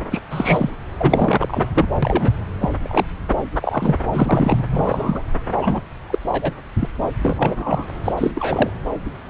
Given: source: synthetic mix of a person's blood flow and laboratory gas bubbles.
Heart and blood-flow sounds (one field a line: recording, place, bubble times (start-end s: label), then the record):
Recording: Doppler ultrasound of blood flow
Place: subclavian vein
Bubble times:
0.11-0.22 s: bubbles
0.31-0.71 s: bubbles
0.98-1.68 s: bubbles
1.74-1.86 s: bubbles
2.02-2.32 s: bubbles
2.61-2.70 s: bubbles
2.83-3.05 s: bubbles
3.62-3.96 s: bubbles
4.13-4.64 s: bubbles
4.71-5.22 s: bubbles
5.57-5.82 s: bubbles
6.10-6.19 s: bubbles
6.32-6.54 s: bubbles
6.80-6.89 s: bubbles
7.23-7.89 s: bubbles
8.04-8.13 s: bubbles
8.17-8.31 s: bubbles
8.35-8.71 s: bubbles
From the record:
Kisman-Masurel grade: 233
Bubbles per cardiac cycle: several, 3 to 8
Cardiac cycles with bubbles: 50 to 99%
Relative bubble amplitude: loud (0.450 to 0.775)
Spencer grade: 3 (all of the cardiac periods contain showers or single bubble signals, but not dominating or overriding the cardiac motion signals)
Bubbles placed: anywhere in the cardiac cycle